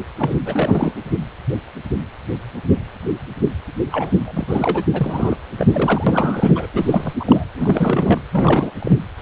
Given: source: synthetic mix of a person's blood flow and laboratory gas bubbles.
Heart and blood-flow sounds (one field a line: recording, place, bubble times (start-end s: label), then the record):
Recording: Doppler ultrasound of blood flow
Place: precordium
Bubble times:
0.18-0.35 s: bubbles
0.46-0.95 s: bubbles
3.92-4.83 s: bubbles
4.93-5.37 s: bubbles
5.57-6.67 s: bubbles
6.74-7.13 s: bubbles
7.20-7.45 s: bubbles
7.57-8.21 s: bubbles
8.31-8.71 s: bubbles
8.79-8.97 s: bubbles
9.18-9.22 s: bubbles
From the record:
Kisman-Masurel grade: 332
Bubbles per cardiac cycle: rolling drumbeat, 9 or more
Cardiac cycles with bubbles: 50 to 99%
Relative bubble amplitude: moderate (0.250 to 0.450)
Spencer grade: 3 (all of the cardiac periods contain showers or single bubble signals, but not dominating or overriding the cardiac motion signals)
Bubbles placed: anywhere in the cardiac cycle